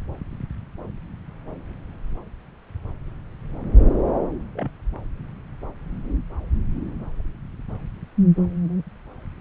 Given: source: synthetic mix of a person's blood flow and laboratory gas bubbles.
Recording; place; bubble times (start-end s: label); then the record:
Doppler ultrasound of blood flow; subclavian vein
4.55-4.70 s: bubbles
From the record:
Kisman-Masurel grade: 111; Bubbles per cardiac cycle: 1 to 2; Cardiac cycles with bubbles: 1 to 10%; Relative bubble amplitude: barely perceptible (0.100 to 0.250); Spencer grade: 1 (occasional bubble signal discernible with the cardiac motion signal, with majority of cardiac periods free of bubbles); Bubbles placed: anywhere in the cardiac cycle